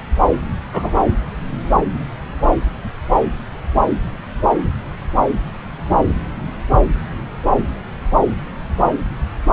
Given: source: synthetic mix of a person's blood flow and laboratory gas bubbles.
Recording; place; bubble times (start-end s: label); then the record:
Doppler ultrasound of blood flow; subclavian vein
0.73-1.05 s: bubbles
From the record:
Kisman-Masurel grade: 113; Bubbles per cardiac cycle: 1 to 2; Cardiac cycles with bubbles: 1 to 10%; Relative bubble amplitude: loud (0.450 to 0.775); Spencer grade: 1 (occasional bubble signal discernible with the cardiac motion signal, with majority of cardiac periods free of bubbles); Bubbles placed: anywhere in the cardiac cycle